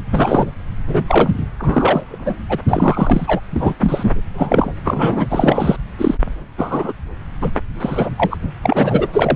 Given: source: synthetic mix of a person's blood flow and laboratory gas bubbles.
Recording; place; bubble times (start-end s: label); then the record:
Doppler ultrasound of blood flow; subclavian vein
0.11-0.53 s: bubbles
0.86-1.36 s: bubbles
1.58-2.04 s: bubbles
2.08-2.37 s: bubbles
2.49-2.58 s: bubbles
2.68-3.40 s: bubbles
3.51-3.73 s: bubbles
3.81-4.21 s: bubbles
4.33-4.73 s: bubbles
4.84-5.27 s: bubbles
5.29-5.76 s: bubbles
5.98-6.15 s: bubbles
6.58-6.92 s: bubbles
7.41-7.51 s: bubbles
7.80-8.09 s: bubbles
8.17-8.37 s: bubbles
8.62-9.07 s: bubbles
9.12-9.36 s: bubbles
From the record:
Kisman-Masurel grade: 243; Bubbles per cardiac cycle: several, 3 to 8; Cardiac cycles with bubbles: 100%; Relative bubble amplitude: loud (0.450 to 0.775); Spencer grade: 3 (all of the cardiac periods contain showers or single bubble signals, but not dominating or overriding the cardiac motion signals); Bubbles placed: anywhere in the cardiac cycle